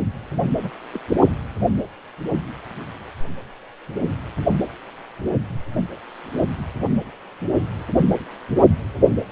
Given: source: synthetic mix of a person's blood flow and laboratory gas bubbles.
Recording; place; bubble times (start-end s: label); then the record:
Doppler ultrasound of blood flow; precordium
0.62-0.71 s: bubbles
0.93-0.99 s: bubbles
From the record:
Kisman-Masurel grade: 121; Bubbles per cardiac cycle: 1 to 2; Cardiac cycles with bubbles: 10 to 50%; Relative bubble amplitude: barely perceptible (0.100 to 0.250); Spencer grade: 2 (many but less than half of the cardiac periods contain bubble signals, singularly or in groups); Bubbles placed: only in the low amplitude regions of the cardiac cycle